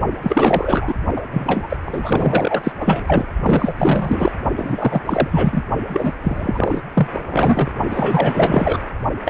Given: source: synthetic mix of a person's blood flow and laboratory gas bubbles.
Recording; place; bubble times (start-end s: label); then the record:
Doppler ultrasound of blood flow; precordium
0.22-0.94 s: bubbles
1.16-1.21 s: bubbles
1.30-1.77 s: bubbles
1.85-2.72 s: bubbles
2.81-3.27 s: bubbles
3.43-3.75 s: bubbles
3.78-4.33 s: bubbles
4.57-5.02 s: bubbles
5.05-5.64 s: bubbles
5.88-6.12 s: bubbles
6.21-6.81 s: bubbles
6.95-7.08 s: bubbles
7.12-7.71 s: bubbles
7.89-8.79 s: bubbles
9.25-9.30 s: bubbles
From the record:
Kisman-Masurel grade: 444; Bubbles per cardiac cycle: continuous sound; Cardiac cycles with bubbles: 100%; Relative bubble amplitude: maximal (0.775 to 0.999); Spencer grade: 4 (maximum detectable bubble signal sounding continuously throughout systole and diastole of every cardiac period, and overriding the amplitude of the normal cardiac signals); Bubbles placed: only in the low amplitude regions of the cardiac cycle